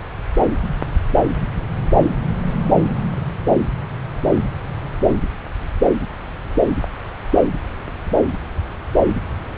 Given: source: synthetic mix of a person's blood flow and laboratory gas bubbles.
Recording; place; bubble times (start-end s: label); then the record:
Doppler ultrasound of blood flow; subclavian vein
no bubbles
From the record:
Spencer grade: 0 (complete lack of bubble signals)